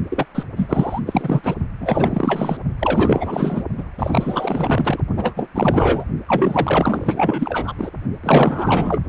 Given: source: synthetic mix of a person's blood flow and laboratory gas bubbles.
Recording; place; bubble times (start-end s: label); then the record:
Doppler ultrasound of blood flow; precordium
0.09-0.26 s: bubbles
0.34-0.43 s: bubbles
0.56-1.00 s: bubbles
1.06-1.55 s: bubbles
1.80-2.57 s: bubbles
2.79-3.64 s: bubbles
3.77-3.84 s: bubbles
3.98-4.99 s: bubbles
5.17-5.47 s: bubbles
5.54-6.04 s: bubbles
6.27-7.74 s: bubbles
7.78-7.91 s: bubbles
8.23-9.03 s: bubbles
From the record:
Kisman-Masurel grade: 444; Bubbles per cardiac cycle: continuous sound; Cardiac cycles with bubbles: 100%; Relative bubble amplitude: maximal (0.775 to 0.999); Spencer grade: 4 (maximum detectable bubble signal sounding continuously throughout systole and diastole of every cardiac period, and overriding the amplitude of the normal cardiac signals); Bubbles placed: only in the low amplitude regions of the cardiac cycle